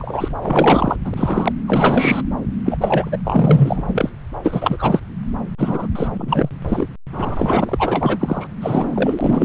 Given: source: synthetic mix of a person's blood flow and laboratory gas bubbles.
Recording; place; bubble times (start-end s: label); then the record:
Doppler ultrasound of blood flow; subclavian vein
0.00-0.98 s: bubbles
1.04-1.52 s: bubbles
1.66-2.22 s: bubbles
2.65-2.77 s: bubbles
2.81-3.18 s: bubbles
3.25-4.10 s: bubbles
4.45-5.01 s: bubbles
5.58-5.87 s: bubbles
5.95-6.08 s: bubbles
6.16-6.50 s: bubbles
6.68-6.89 s: bubbles
7.12-8.47 s: bubbles
8.61-9.45 s: bubbles
From the record:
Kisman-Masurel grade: 444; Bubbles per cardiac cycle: continuous sound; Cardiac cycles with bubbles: 100%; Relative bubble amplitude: maximal (0.775 to 0.999); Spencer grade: 4 (maximum detectable bubble signal sounding continuously throughout systole and diastole of every cardiac period, and overriding the amplitude of the normal cardiac signals); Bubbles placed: anywhere in the cardiac cycle